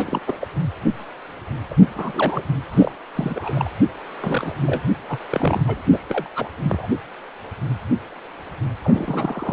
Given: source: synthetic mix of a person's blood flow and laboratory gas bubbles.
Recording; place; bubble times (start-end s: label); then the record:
Doppler ultrasound of blood flow; precordium
0.00-0.21 s: bubbles
0.27-0.39 s: bubbles
0.41-0.47 s: bubbles
1.70-1.75 s: bubbles
1.81-2.43 s: bubbles
2.71-2.92 s: bubbles
3.15-3.71 s: bubbles
4.20-4.55 s: bubbles
4.62-4.82 s: bubbles
5.08-5.19 s: bubbles
5.29-5.63 s: bubbles
5.66-5.82 s: bubbles
5.92-6.03 s: bubbles
6.08-6.30 s: bubbles
6.36-6.51 s: bubbles
6.62-6.87 s: bubbles
8.82-9.53 s: bubbles
From the record:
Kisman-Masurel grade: 332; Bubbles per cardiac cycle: rolling drumbeat, 9 or more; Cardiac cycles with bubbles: 50 to 99%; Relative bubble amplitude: moderate (0.250 to 0.450); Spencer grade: 3 (all of the cardiac periods contain showers or single bubble signals, but not dominating or overriding the cardiac motion signals); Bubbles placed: anywhere in the cardiac cycle